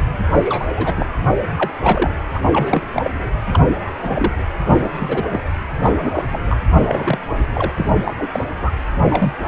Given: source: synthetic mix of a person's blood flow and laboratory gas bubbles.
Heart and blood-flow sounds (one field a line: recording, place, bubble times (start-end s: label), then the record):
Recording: Doppler ultrasound of blood flow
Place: precordium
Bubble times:
0.33-0.69 s: bubbles
0.76-1.06 s: bubbles
1.57-1.74 s: bubbles
1.82-2.10 s: bubbles
2.33-2.40 s: bubbles
2.52-2.84 s: bubbles
2.92-3.10 s: bubbles
3.52-3.63 s: bubbles
4.01-4.33 s: bubbles
4.67-4.89 s: bubbles
4.94-5.23 s: bubbles
5.31-5.40 s: bubbles
5.83-6.23 s: bubbles
6.30-6.57 s: bubbles
6.70-7.19 s: bubbles
7.54-7.71 s: bubbles
7.76-7.92 s: bubbles
8.04-8.14 s: bubbles
8.18-8.29 s: bubbles
8.33-8.45 s: bubbles
8.61-8.71 s: bubbles
9.00-9.33 s: bubbles
9.44-9.48 s: bubbles
From the record:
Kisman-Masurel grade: 242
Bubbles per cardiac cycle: several, 3 to 8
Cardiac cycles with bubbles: 100%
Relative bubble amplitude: moderate (0.250 to 0.450)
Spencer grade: 3 (all of the cardiac periods contain showers or single bubble signals, but not dominating or overriding the cardiac motion signals)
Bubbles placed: anywhere in the cardiac cycle